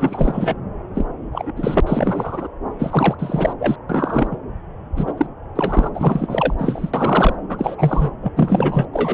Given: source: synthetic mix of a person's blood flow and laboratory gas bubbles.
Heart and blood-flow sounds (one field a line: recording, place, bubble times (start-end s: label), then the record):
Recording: Doppler ultrasound of blood flow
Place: subclavian vein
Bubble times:
0.00-0.54 s: bubbles
0.95-1.06 s: bubbles
1.32-1.52 s: bubbles
1.56-1.81 s: bubbles
1.87-2.48 s: bubbles
2.79-3.15 s: bubbles
3.19-3.53 s: bubbles
3.58-3.76 s: bubbles
3.89-4.27 s: bubbles
4.30-4.38 s: bubbles
4.96-5.13 s: bubbles
5.17-5.26 s: bubbles
5.55-5.89 s: bubbles
5.94-6.54 s: bubbles
6.58-6.91 s: bubbles
6.93-7.35 s: bubbles
7.49-7.75 s: bubbles
7.78-8.11 s: bubbles
8.21-8.32 s: bubbles
8.36-8.86 s: bubbles
8.93-9.14 s: bubbles
From the record:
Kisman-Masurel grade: 343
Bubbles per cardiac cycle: rolling drumbeat, 9 or more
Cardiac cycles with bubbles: 100%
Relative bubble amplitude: loud (0.450 to 0.775)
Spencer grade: 3 (all of the cardiac periods contain showers or single bubble signals, but not dominating or overriding the cardiac motion signals)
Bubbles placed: anywhere in the cardiac cycle